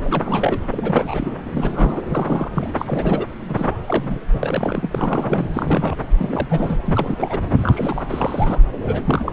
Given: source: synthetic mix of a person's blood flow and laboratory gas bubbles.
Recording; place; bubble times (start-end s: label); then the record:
Doppler ultrasound of blood flow; subclavian vein
0.04-0.60 s: bubbles
0.70-1.33 s: bubbles
1.50-2.02 s: bubbles
2.09-2.50 s: bubbles
2.54-2.70 s: bubbles
2.77-3.25 s: bubbles
3.48-3.76 s: bubbles
3.86-4.18 s: bubbles
4.32-4.41 s: bubbles
4.43-5.46 s: bubbles
5.54-5.96 s: bubbles
6.18-6.79 s: bubbles
6.86-7.39 s: bubbles
7.58-8.05 s: bubbles
8.10-8.62 s: bubbles
8.82-9.04 s: bubbles
9.07-9.32 s: bubbles
From the record:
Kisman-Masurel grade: 342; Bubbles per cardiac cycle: rolling drumbeat, 9 or more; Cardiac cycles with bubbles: 100%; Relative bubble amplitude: moderate (0.250 to 0.450); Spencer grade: 3 (all of the cardiac periods contain showers or single bubble signals, but not dominating or overriding the cardiac motion signals); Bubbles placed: anywhere in the cardiac cycle